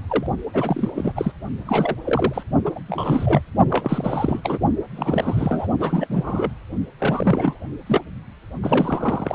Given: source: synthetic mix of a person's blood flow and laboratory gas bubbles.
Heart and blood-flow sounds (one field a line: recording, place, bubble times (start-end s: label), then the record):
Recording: Doppler ultrasound of blood flow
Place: precordium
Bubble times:
0.08-0.27 s: bubbles
0.53-0.91 s: bubbles
0.95-1.12 s: bubbles
1.16-1.32 s: bubbles
1.65-1.95 s: bubbles
2.04-2.43 s: bubbles
2.64-2.80 s: bubbles
2.88-3.41 s: bubbles
3.69-4.40 s: bubbles
4.43-4.58 s: bubbles
4.96-5.67 s: bubbles
5.80-6.07 s: bubbles
6.10-6.52 s: bubbles
6.99-7.64 s: bubbles
7.86-8.01 s: bubbles
8.62-9.35 s: bubbles
From the record:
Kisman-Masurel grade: 342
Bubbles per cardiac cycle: rolling drumbeat, 9 or more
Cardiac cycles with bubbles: 100%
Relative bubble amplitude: moderate (0.250 to 0.450)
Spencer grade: 3 (all of the cardiac periods contain showers or single bubble signals, but not dominating or overriding the cardiac motion signals)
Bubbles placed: only in the low amplitude regions of the cardiac cycle